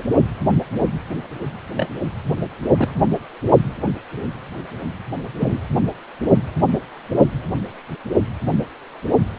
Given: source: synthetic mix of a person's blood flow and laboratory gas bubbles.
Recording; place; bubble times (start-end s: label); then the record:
Doppler ultrasound of blood flow; precordium
1.75-1.89 s: bubbles
2.77-3.03 s: bubbles
5.40-5.60 s: bubbles
From the record:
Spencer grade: 2 (many but less than half of the cardiac periods contain bubble signals, singularly or in groups); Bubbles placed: only in the low amplitude regions of the cardiac cycle